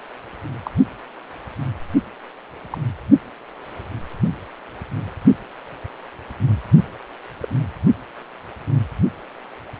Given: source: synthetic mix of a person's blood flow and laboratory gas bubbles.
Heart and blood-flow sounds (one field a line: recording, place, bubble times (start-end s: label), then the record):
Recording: Doppler ultrasound of blood flow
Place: precordium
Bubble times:
0.60-0.70 s: bubbles
2.70-2.78 s: bubbles
7.40-7.48 s: bubbles
From the record:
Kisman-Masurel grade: 121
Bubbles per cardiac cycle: 1 to 2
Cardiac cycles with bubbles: 10 to 50%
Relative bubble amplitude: barely perceptible (0.100 to 0.250)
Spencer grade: 2 (many but less than half of the cardiac periods contain bubble signals, singularly or in groups)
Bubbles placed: only in the low amplitude regions of the cardiac cycle